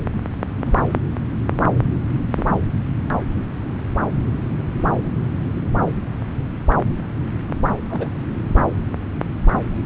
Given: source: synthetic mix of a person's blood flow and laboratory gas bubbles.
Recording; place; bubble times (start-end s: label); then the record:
Doppler ultrasound of blood flow; subclavian vein
0.66-0.81 s: bubbles
2.35-2.48 s: bubbles
3.11-3.17 s: bubbles
7.90-8.13 s: bubbles
8.16-8.21 s: bubbles
From the record:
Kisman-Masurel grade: 121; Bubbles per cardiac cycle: 1 to 2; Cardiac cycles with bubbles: 10 to 50%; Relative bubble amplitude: barely perceptible (0.100 to 0.250); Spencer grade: 2 (many but less than half of the cardiac periods contain bubble signals, singularly or in groups); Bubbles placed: anywhere in the cardiac cycle